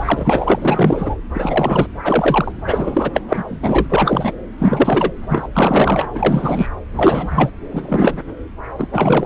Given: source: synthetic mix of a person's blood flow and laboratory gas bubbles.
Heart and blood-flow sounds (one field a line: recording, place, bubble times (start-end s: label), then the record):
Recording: Doppler ultrasound of blood flow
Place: subclavian vein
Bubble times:
0.00-0.59 s: bubbles
0.61-1.16 s: bubbles
1.33-1.86 s: bubbles
2.03-2.52 s: bubbles
2.65-3.11 s: bubbles
3.13-3.21 s: bubbles
3.29-3.44 s: bubbles
3.48-4.34 s: bubbles
4.58-5.12 s: bubbles
5.28-5.47 s: bubbles
5.53-6.07 s: bubbles
6.14-6.68 s: bubbles
6.96-7.52 s: bubbles
7.72-8.20 s: bubbles
8.78-8.87 s: bubbles
8.91-9.26 s: bubbles
From the record:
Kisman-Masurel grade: 343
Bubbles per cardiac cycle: rolling drumbeat, 9 or more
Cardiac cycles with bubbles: 100%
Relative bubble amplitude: loud (0.450 to 0.775)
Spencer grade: 3 (all of the cardiac periods contain showers or single bubble signals, but not dominating or overriding the cardiac motion signals)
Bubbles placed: anywhere in the cardiac cycle